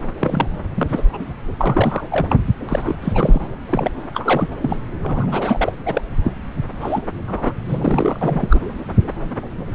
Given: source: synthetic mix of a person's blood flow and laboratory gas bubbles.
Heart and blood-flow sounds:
Doppler ultrasound of blood flow; subclavian vein
0.20-0.47 s: bubbles
0.74-1.03 s: bubbles
1.13-1.18 s: bubbles
1.58-2.07 s: bubbles
2.10-2.36 s: bubbles
2.68-2.98 s: bubbles
3.01-3.40 s: bubbles
3.69-3.92 s: bubbles
4.14-4.48 s: bubbles
4.62-4.77 s: bubbles
5.02-5.26 s: bubbles
5.31-5.72 s: bubbles
5.85-6.01 s: bubbles
6.24-6.32 s: bubbles
6.80-7.02 s: bubbles
7.27-7.53 s: bubbles
7.68-8.60 s: bubbles
From the record:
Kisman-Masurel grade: 332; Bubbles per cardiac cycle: rolling drumbeat, 9 or more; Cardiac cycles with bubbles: 50 to 99%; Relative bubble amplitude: moderate (0.250 to 0.450); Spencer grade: 3 (all of the cardiac periods contain showers or single bubble signals, but not dominating or overriding the cardiac motion signals); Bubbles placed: anywhere in the cardiac cycle

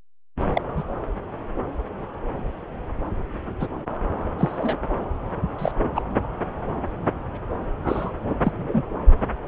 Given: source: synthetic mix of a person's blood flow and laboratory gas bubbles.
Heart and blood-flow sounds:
Doppler ultrasound of blood flow; subclavian vein
0.53-0.61 s: bubbles
0.77-0.83 s: bubbles
3.59-3.67 s: bubbles
4.38-4.77 s: bubbles
5.58-5.71 s: bubbles
5.95-6.01 s: bubbles
7.83-8.11 s: bubbles
8.44-8.52 s: bubbles
8.57-8.83 s: bubbles
From the record:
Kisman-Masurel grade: 123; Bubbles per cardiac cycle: 1 to 2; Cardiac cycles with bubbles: 10 to 50%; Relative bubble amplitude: loud (0.450 to 0.775); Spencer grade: 2 (many but less than half of the cardiac periods contain bubble signals, singularly or in groups); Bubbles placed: anywhere in the cardiac cycle

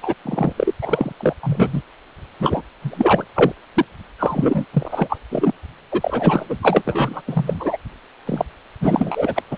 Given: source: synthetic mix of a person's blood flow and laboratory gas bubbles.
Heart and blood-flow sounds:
Doppler ultrasound of blood flow; precordium
0.03-0.15 s: bubbles
0.25-0.53 s: bubbles
0.56-0.73 s: bubbles
0.82-1.12 s: bubbles
1.19-1.34 s: bubbles
1.43-1.81 s: bubbles
2.40-2.62 s: bubbles
2.82-3.25 s: bubbles
3.35-3.52 s: bubbles
3.74-3.85 s: bubbles
4.19-4.65 s: bubbles
4.73-5.18 s: bubbles
5.31-5.53 s: bubbles
5.92-6.46 s: bubbles
6.49-6.58 s: bubbles
6.62-7.21 s: bubbles
7.27-7.77 s: bubbles
8.26-8.43 s: bubbles
8.81-9.42 s: bubbles
9.50-9.57 s: bubbles
From the record:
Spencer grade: 3 (all of the cardiac periods contain showers or single bubble signals, but not dominating or overriding the cardiac motion signals); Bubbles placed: anywhere in the cardiac cycle

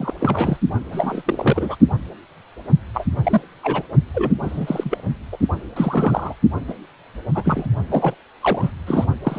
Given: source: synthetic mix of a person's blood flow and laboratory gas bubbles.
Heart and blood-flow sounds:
Doppler ultrasound of blood flow; precordium
0.00-0.13 s: bubbles
0.20-0.57 s: bubbles
0.92-1.22 s: bubbles
1.25-1.75 s: bubbles
2.94-3.05 s: bubbles
3.23-3.41 s: bubbles
3.63-3.83 s: bubbles
4.14-4.33 s: bubbles
4.42-5.01 s: bubbles
5.32-5.37 s: bubbles
5.76-6.36 s: bubbles
6.67-6.74 s: bubbles
7.34-7.67 s: bubbles
7.90-8.14 s: bubbles
8.41-8.71 s: bubbles
8.86-9.06 s: bubbles
9.23-9.39 s: bubbles
From the record:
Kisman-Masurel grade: 242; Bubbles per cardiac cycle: several, 3 to 8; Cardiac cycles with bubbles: 100%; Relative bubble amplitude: moderate (0.250 to 0.450); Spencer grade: 3 (all of the cardiac periods contain showers or single bubble signals, but not dominating or overriding the cardiac motion signals); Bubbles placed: only in the low amplitude regions of the cardiac cycle

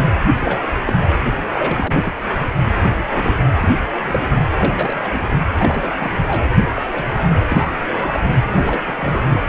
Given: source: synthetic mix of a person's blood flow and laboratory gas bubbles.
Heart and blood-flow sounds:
Doppler ultrasound of blood flow; precordium
0.40-0.66 s: bubbles
0.86-0.93 s: bubbles
1.48-1.94 s: bubbles
1.97-2.12 s: bubbles
2.96-3.44 s: bubbles
3.58-3.77 s: bubbles
4.00-4.37 s: bubbles
4.58-5.10 s: bubbles
5.13-5.29 s: bubbles
5.58-5.92 s: bubbles
5.99-6.12 s: bubbles
6.27-6.46 s: bubbles
6.75-6.82 s: bubbles
6.93-7.06 s: bubbles
7.20-7.62 s: bubbles
7.80-8.21 s: bubbles
8.56-8.81 s: bubbles
8.86-9.40 s: bubbles
From the record:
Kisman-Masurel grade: 242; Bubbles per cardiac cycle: several, 3 to 8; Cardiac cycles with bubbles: 100%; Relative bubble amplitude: moderate (0.250 to 0.450); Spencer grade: 3 (all of the cardiac periods contain showers or single bubble signals, but not dominating or overriding the cardiac motion signals); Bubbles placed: anywhere in the cardiac cycle

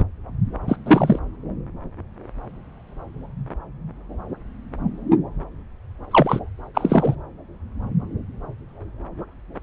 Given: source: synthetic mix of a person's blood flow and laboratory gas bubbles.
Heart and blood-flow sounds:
Doppler ultrasound of blood flow; subclavian vein
0.68-0.76 s: bubbles
0.86-1.19 s: bubbles
6.11-6.40 s: bubbles
6.74-7.15 s: bubbles
From the record:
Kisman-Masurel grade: 223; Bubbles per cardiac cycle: several, 3 to 8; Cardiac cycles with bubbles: 10 to 50%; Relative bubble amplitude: loud (0.450 to 0.775); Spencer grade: 2 (many but less than half of the cardiac periods contain bubble signals, singularly or in groups); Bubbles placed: anywhere in the cardiac cycle

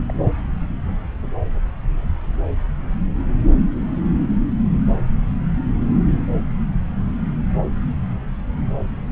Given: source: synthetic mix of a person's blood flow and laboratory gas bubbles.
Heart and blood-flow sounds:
Doppler ultrasound of blood flow; subclavian vein
0.08-0.14 s: bubbles
From the record:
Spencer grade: 1 (occasional bubble signal discernible with the cardiac motion signal, with majority of cardiac periods free of bubbles); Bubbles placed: anywhere in the cardiac cycle

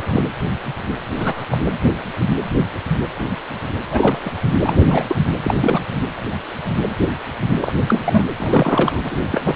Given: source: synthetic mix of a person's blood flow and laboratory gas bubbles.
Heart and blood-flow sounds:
Doppler ultrasound of blood flow; precordium
0.00-0.22 s: bubbles
1.14-1.45 s: bubbles
1.51-1.57 s: bubbles
3.91-4.33 s: bubbles
4.63-5.04 s: bubbles
5.08-5.15 s: bubbles
5.42-5.80 s: bubbles
5.92-6.01 s: bubbles
7.61-7.72 s: bubbles
7.87-8.24 s: bubbles
8.37-9.15 s: bubbles
9.31-9.55 s: bubbles
From the record:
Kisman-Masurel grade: 232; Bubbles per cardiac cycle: several, 3 to 8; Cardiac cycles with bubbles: 50 to 99%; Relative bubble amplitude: moderate (0.250 to 0.450); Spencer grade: 3 (all of the cardiac periods contain showers or single bubble signals, but not dominating or overriding the cardiac motion signals); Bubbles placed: anywhere in the cardiac cycle

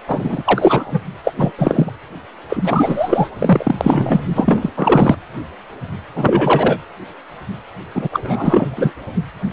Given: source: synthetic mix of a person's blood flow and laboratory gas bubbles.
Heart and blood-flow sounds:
Doppler ultrasound of blood flow; precordium
0.08-1.01 s: bubbles
1.24-1.32 s: bubbles
1.38-1.52 s: bubbles
1.57-1.91 s: bubbles
2.49-3.29 s: bubbles
3.38-3.75 s: bubbles
3.80-4.25 s: bubbles
4.34-4.71 s: bubbles
4.77-5.15 s: bubbles
6.15-6.79 s: bubbles
7.95-8.08 s: bubbles
8.11-8.91 s: bubbles
From the record:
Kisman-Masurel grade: 333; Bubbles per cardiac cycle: rolling drumbeat, 9 or more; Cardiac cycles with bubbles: 50 to 99%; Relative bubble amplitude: loud (0.450 to 0.775); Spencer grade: 3 (all of the cardiac periods contain showers or single bubble signals, but not dominating or overriding the cardiac motion signals); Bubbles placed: anywhere in the cardiac cycle

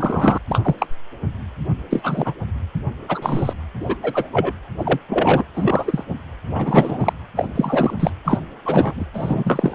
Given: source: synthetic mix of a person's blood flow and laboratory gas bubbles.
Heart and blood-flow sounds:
Doppler ultrasound of blood flow; precordium
0.00-0.38 s: bubbles
0.48-0.76 s: bubbles
0.78-0.87 s: bubbles
1.90-2.33 s: bubbles
3.08-3.53 s: bubbles
3.80-3.96 s: bubbles
4.03-4.29 s: bubbles
4.33-4.53 s: bubbles
4.78-4.99 s: bubbles
5.09-5.44 s: bubbles
5.54-6.04 s: bubbles
6.54-7.13 s: bubbles
7.36-7.48 s: bubbles
7.56-7.94 s: bubbles
7.99-8.11 s: bubbles
8.24-8.38 s: bubbles
8.64-9.05 s: bubbles
9.13-9.75 s: bubbles
From the record:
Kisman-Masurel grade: 243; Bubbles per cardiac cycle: several, 3 to 8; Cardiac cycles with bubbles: 100%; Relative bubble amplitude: loud (0.450 to 0.775); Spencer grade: 3 (all of the cardiac periods contain showers or single bubble signals, but not dominating or overriding the cardiac motion signals); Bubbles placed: anywhere in the cardiac cycle

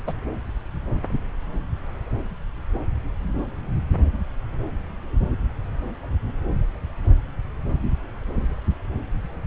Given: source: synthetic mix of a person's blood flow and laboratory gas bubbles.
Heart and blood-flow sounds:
Doppler ultrasound of blood flow; subclavian vein
0.07-0.12 s: bubbles
From the record:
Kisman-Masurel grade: 113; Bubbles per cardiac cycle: 1 to 2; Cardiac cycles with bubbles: 1 to 10%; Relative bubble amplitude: loud (0.450 to 0.775); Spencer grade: 1 (occasional bubble signal discernible with the cardiac motion signal, with majority of cardiac periods free of bubbles); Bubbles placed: anywhere in the cardiac cycle

